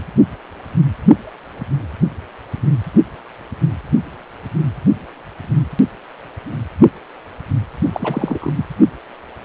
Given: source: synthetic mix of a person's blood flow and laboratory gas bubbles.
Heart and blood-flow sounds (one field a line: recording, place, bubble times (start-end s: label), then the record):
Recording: Doppler ultrasound of blood flow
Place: precordium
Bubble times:
7.92-8.67 s: bubbles
From the record:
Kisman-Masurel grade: 212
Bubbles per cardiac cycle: several, 3 to 8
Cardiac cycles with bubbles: 1 to 10%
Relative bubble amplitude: moderate (0.250 to 0.450)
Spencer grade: 1 (occasional bubble signal discernible with the cardiac motion signal, with majority of cardiac periods free of bubbles)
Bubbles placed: only in the low amplitude regions of the cardiac cycle